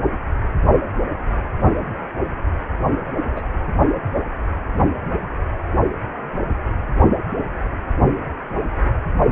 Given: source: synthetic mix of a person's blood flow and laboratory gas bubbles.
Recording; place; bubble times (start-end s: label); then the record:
Doppler ultrasound of blood flow; precordium
3.36-3.42 s: bubbles
From the record:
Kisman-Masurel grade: 112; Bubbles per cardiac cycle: 1 to 2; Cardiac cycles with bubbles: 1 to 10%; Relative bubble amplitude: moderate (0.250 to 0.450); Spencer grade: 1 (occasional bubble signal discernible with the cardiac motion signal, with majority of cardiac periods free of bubbles); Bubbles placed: only in the low amplitude regions of the cardiac cycle